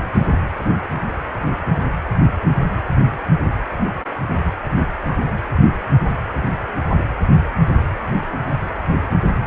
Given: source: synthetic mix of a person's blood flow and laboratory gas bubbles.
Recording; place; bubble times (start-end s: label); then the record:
Doppler ultrasound of blood flow; precordium
4.76-4.81 s: bubbles
From the record:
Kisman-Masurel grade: 121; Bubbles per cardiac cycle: 1 to 2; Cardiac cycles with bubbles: 10 to 50%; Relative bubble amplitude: barely perceptible (0.100 to 0.250); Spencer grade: 2 (many but less than half of the cardiac periods contain bubble signals, singularly or in groups); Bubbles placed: anywhere in the cardiac cycle